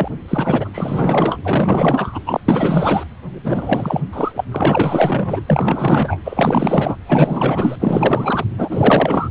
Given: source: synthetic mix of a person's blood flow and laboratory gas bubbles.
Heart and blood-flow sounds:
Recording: Doppler ultrasound of blood flow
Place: precordium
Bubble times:
0.00-0.08 s: bubbles
0.28-0.69 s: bubbles
0.73-1.39 s: bubbles
1.45-2.20 s: bubbles
2.25-2.40 s: bubbles
2.48-3.04 s: bubbles
3.31-4.01 s: bubbles
4.12-4.32 s: bubbles
4.34-4.44 s: bubbles
4.51-5.40 s: bubbles
5.46-6.18 s: bubbles
6.25-6.96 s: bubbles
7.06-7.76 s: bubbles
7.80-8.44 s: bubbles
8.58-9.29 s: bubbles
From the record:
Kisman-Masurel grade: 444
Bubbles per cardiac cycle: continuous sound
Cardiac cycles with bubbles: 100%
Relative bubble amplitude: maximal (0.775 to 0.999)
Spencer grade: 4 (maximum detectable bubble signal sounding continuously throughout systole and diastole of every cardiac period, and overriding the amplitude of the normal cardiac signals)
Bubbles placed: anywhere in the cardiac cycle

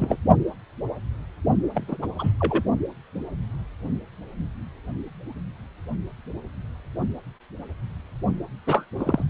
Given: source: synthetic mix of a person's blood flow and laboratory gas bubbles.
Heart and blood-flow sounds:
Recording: Doppler ultrasound of blood flow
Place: precordium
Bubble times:
0.00-0.16 s: bubbles
1.74-1.84 s: bubbles
1.88-1.97 s: bubbles
2.02-2.07 s: bubbles
2.19-2.33 s: bubbles
2.39-2.63 s: bubbles
8.66-8.85 s: bubbles
8.97-9.24 s: bubbles
From the record:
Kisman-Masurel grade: 222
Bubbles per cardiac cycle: several, 3 to 8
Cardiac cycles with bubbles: 10 to 50%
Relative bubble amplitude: moderate (0.250 to 0.450)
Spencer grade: 2 (many but less than half of the cardiac periods contain bubble signals, singularly or in groups)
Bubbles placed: only in the low amplitude regions of the cardiac cycle

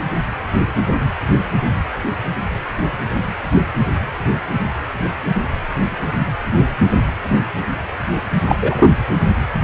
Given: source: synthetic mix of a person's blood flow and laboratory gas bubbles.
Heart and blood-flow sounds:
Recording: Doppler ultrasound of blood flow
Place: precordium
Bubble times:
8.49-8.56 s: bubbles
8.62-8.91 s: bubbles
From the record:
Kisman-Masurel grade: 213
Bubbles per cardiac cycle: several, 3 to 8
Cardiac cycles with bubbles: 1 to 10%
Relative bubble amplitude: loud (0.450 to 0.775)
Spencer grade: 1 (occasional bubble signal discernible with the cardiac motion signal, with majority of cardiac periods free of bubbles)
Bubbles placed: anywhere in the cardiac cycle

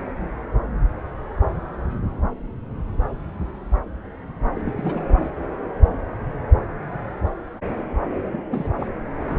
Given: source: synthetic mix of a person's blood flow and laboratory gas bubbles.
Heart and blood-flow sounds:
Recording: Doppler ultrasound of blood flow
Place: subclavian vein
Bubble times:
4.53-4.61 s: bubbles
4.65-4.73 s: bubbles
4.77-5.03 s: bubbles
8.32-8.43 s: bubbles
8.47-8.68 s: bubbles
8.80-8.88 s: bubbles
9.19-9.39 s: bubbles
From the record:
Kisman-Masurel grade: 221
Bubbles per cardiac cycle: several, 3 to 8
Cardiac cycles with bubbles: 10 to 50%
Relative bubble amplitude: barely perceptible (0.100 to 0.250)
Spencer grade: 2 (many but less than half of the cardiac periods contain bubble signals, singularly or in groups)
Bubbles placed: anywhere in the cardiac cycle

